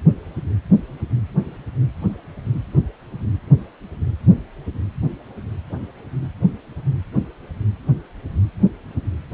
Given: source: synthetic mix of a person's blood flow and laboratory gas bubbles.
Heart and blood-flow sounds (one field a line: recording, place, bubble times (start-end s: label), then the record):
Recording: Doppler ultrasound of blood flow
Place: precordium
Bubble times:
no bubbles
From the record:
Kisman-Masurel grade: 000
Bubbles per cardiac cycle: 0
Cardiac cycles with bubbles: 0%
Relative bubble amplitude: no bubbles discernible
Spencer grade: 0 (complete lack of bubble signals)